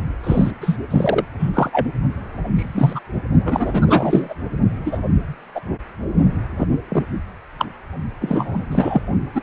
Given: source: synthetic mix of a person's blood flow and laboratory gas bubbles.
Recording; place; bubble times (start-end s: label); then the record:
Doppler ultrasound of blood flow; precordium
0.23-0.51 s: bubbles
0.61-0.77 s: bubbles
0.90-1.25 s: bubbles
1.39-1.50 s: bubbles
1.54-1.87 s: bubbles
2.56-3.00 s: bubbles
3.45-4.34 s: bubbles
4.85-4.98 s: bubbles
5.54-5.60 s: bubbles
6.58-6.67 s: bubbles
6.89-7.04 s: bubbles
7.58-7.66 s: bubbles
8.21-8.67 s: bubbles
8.71-9.02 s: bubbles
9.35-9.42 s: bubbles
From the record:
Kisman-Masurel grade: 243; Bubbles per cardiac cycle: several, 3 to 8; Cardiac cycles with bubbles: 100%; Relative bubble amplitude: loud (0.450 to 0.775); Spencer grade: 3 (all of the cardiac periods contain showers or single bubble signals, but not dominating or overriding the cardiac motion signals); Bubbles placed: only in the low amplitude regions of the cardiac cycle